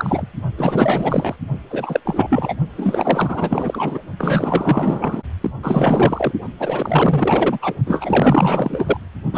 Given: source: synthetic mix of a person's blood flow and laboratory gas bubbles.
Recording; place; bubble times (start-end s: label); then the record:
Doppler ultrasound of blood flow; precordium
0.00-0.27 s: bubbles
0.57-1.36 s: bubbles
1.70-2.00 s: bubbles
2.04-2.54 s: bubbles
2.76-3.99 s: bubbles
4.18-5.23 s: bubbles
5.41-5.51 s: bubbles
5.62-6.33 s: bubbles
6.60-7.58 s: bubbles
7.62-7.74 s: bubbles
7.86-8.97 s: bubbles
9.32-9.38 s: bubbles
From the record:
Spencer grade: 4 (maximum detectable bubble signal sounding continuously throughout systole and diastole of every cardiac period, and overriding the amplitude of the normal cardiac signals); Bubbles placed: only in the low amplitude regions of the cardiac cycle